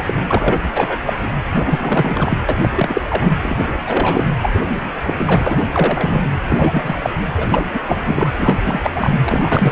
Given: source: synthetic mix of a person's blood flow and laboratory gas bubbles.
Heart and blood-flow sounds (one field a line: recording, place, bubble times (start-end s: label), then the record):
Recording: Doppler ultrasound of blood flow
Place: precordium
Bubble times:
0.02-0.14 s: bubbles
0.29-0.60 s: bubbles
0.74-0.98 s: bubbles
1.05-1.14 s: bubbles
1.52-2.38 s: bubbles
2.48-2.54 s: bubbles
2.61-2.69 s: bubbles
2.76-3.02 s: bubbles
3.09-3.34 s: bubbles
3.42-3.65 s: bubbles
3.86-4.26 s: bubbles
4.42-4.59 s: bubbles
4.75-4.92 s: bubbles
5.06-5.70 s: bubbles
5.73-6.24 s: bubbles
6.47-6.96 s: bubbles
6.99-7.10 s: bubbles
7.36-7.65 s: bubbles
7.74-7.79 s: bubbles
7.82-8.29 s: bubbles
8.38-8.90 s: bubbles
8.95-9.21 s: bubbles
9.23-9.72 s: bubbles
From the record:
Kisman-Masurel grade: 343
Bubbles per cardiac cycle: rolling drumbeat, 9 or more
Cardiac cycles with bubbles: 100%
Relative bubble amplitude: loud (0.450 to 0.775)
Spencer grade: 3 (all of the cardiac periods contain showers or single bubble signals, but not dominating or overriding the cardiac motion signals)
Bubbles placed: anywhere in the cardiac cycle